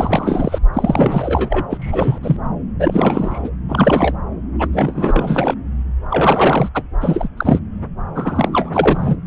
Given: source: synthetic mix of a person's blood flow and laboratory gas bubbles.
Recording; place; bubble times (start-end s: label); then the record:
Doppler ultrasound of blood flow; subclavian vein
0.00-0.59 s: bubbles
0.73-1.65 s: bubbles
1.69-2.19 s: bubbles
2.23-2.37 s: bubbles
2.79-3.50 s: bubbles
3.69-4.13 s: bubbles
4.59-4.68 s: bubbles
4.73-5.54 s: bubbles
6.10-6.70 s: bubbles
6.74-6.83 s: bubbles
7.01-7.29 s: bubbles
7.37-7.59 s: bubbles
8.15-9.16 s: bubbles
From the record:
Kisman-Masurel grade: 343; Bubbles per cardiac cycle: rolling drumbeat, 9 or more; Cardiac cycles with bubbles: 100%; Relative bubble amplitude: loud (0.450 to 0.775); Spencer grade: 3 (all of the cardiac periods contain showers or single bubble signals, but not dominating or overriding the cardiac motion signals); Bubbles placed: anywhere in the cardiac cycle